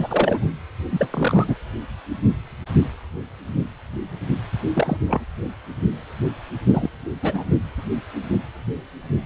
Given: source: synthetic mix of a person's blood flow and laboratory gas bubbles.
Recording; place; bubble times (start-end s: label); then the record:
Doppler ultrasound of blood flow; precordium
0.00-0.46 s: bubbles
0.91-1.08 s: bubbles
1.12-1.55 s: bubbles
4.73-4.97 s: bubbles
5.06-5.24 s: bubbles
6.66-6.89 s: bubbles
7.22-7.44 s: bubbles
From the record:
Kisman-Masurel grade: 222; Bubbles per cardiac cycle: several, 3 to 8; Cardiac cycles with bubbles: 10 to 50%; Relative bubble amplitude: moderate (0.250 to 0.450); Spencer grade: 2 (many but less than half of the cardiac periods contain bubble signals, singularly or in groups); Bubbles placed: anywhere in the cardiac cycle